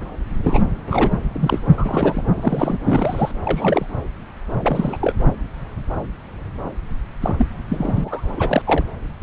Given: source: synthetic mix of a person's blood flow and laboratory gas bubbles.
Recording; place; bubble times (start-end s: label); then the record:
Doppler ultrasound of blood flow; subclavian vein
0.44-0.62 s: bubbles
0.86-1.13 s: bubbles
1.35-1.60 s: bubbles
1.72-2.24 s: bubbles
2.36-2.78 s: bubbles
2.85-3.31 s: bubbles
3.44-3.86 s: bubbles
4.61-4.97 s: bubbles
5.01-5.13 s: bubbles
7.21-7.36 s: bubbles
7.38-7.46 s: bubbles
7.69-8.62 s: bubbles
8.65-8.85 s: bubbles
9.21-9.23 s: bubbles
From the record:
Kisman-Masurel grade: 232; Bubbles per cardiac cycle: several, 3 to 8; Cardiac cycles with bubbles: 50 to 99%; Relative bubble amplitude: moderate (0.250 to 0.450); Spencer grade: 3 (all of the cardiac periods contain showers or single bubble signals, but not dominating or overriding the cardiac motion signals); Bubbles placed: anywhere in the cardiac cycle